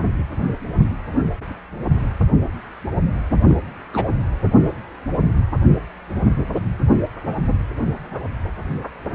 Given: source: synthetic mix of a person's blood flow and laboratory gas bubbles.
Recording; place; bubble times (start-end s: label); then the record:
Doppler ultrasound of blood flow; precordium
3.42-3.57 s: bubbles
3.93-4.04 s: bubbles
4.62-4.70 s: bubbles
From the record:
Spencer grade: 2 (many but less than half of the cardiac periods contain bubble signals, singularly or in groups); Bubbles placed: anywhere in the cardiac cycle